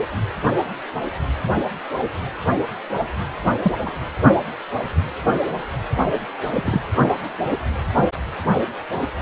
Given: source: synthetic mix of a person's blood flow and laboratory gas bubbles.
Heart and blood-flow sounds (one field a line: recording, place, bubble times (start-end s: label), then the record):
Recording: Doppler ultrasound of blood flow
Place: precordium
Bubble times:
3.63-3.73 s: bubbles
3.86-3.92 s: bubbles
6.54-6.82 s: bubbles
From the record:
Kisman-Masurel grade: 122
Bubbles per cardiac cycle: 1 to 2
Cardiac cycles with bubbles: 10 to 50%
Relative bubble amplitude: moderate (0.250 to 0.450)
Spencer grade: 2 (many but less than half of the cardiac periods contain bubble signals, singularly or in groups)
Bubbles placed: anywhere in the cardiac cycle